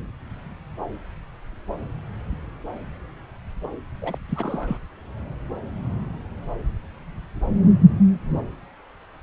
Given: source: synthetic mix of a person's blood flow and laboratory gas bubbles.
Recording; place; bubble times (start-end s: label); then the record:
Doppler ultrasound of blood flow; subclavian vein
4.01-4.18 s: bubbles
4.29-4.77 s: bubbles
From the record:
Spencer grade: 1 (occasional bubble signal discernible with the cardiac motion signal, with majority of cardiac periods free of bubbles); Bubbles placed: anywhere in the cardiac cycle